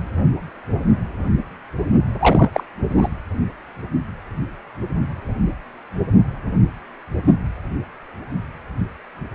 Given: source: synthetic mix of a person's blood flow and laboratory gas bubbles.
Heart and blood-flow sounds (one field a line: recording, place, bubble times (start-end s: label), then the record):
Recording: Doppler ultrasound of blood flow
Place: precordium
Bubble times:
2.19-2.50 s: bubbles
2.52-2.64 s: bubbles
2.90-3.09 s: bubbles
From the record:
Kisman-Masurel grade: 212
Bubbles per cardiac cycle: several, 3 to 8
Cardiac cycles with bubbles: 1 to 10%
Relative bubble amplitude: moderate (0.250 to 0.450)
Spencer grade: 1 (occasional bubble signal discernible with the cardiac motion signal, with majority of cardiac periods free of bubbles)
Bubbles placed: anywhere in the cardiac cycle